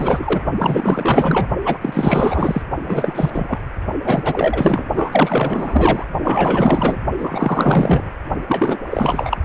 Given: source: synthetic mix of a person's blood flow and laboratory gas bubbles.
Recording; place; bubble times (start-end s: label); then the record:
Doppler ultrasound of blood flow; precordium
0.00-0.41 s: bubbles
0.58-1.48 s: bubbles
1.65-2.62 s: bubbles
2.83-3.59 s: bubbles
4.03-4.86 s: bubbles
4.94-6.06 s: bubbles
6.22-6.96 s: bubbles
7.17-8.10 s: bubbles
8.47-8.81 s: bubbles
8.91-9.38 s: bubbles
From the record:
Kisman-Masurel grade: 444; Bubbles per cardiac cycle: continuous sound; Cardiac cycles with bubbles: 100%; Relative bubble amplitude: maximal (0.775 to 0.999); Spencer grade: 4 (maximum detectable bubble signal sounding continuously throughout systole and diastole of every cardiac period, and overriding the amplitude of the normal cardiac signals); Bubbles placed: only in the low amplitude regions of the cardiac cycle